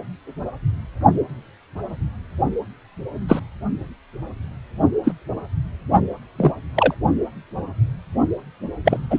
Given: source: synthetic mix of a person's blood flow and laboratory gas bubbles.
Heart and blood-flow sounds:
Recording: Doppler ultrasound of blood flow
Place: precordium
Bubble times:
3.28-3.40 s: bubbles
5.04-5.12 s: bubbles
6.38-6.52 s: bubbles
6.75-6.95 s: bubbles
8.85-8.97 s: bubbles
9.10-9.19 s: bubbles
From the record:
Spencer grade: 2 (many but less than half of the cardiac periods contain bubble signals, singularly or in groups)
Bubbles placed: only in the low amplitude regions of the cardiac cycle

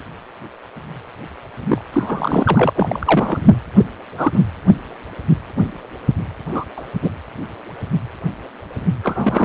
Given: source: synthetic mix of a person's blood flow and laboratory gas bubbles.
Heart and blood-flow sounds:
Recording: Doppler ultrasound of blood flow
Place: precordium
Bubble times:
1.69-1.84 s: bubbles
1.92-2.70 s: bubbles
2.75-3.56 s: bubbles
3.77-3.85 s: bubbles
4.17-4.39 s: bubbles
6.53-6.64 s: bubbles
6.76-6.82 s: bubbles
7.02-7.09 s: bubbles
9.03-9.45 s: bubbles
From the record:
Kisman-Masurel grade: 223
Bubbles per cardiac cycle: several, 3 to 8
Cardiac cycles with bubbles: 10 to 50%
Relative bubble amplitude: loud (0.450 to 0.775)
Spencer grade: 2 (many but less than half of the cardiac periods contain bubble signals, singularly or in groups)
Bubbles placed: anywhere in the cardiac cycle

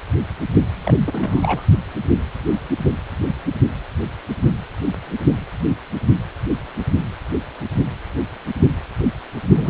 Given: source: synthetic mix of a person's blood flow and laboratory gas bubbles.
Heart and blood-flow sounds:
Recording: Doppler ultrasound of blood flow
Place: precordium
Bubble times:
0.72-1.62 s: bubbles
9.56-9.70 s: bubbles
From the record:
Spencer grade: 1 (occasional bubble signal discernible with the cardiac motion signal, with majority of cardiac periods free of bubbles)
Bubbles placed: only in the low amplitude regions of the cardiac cycle

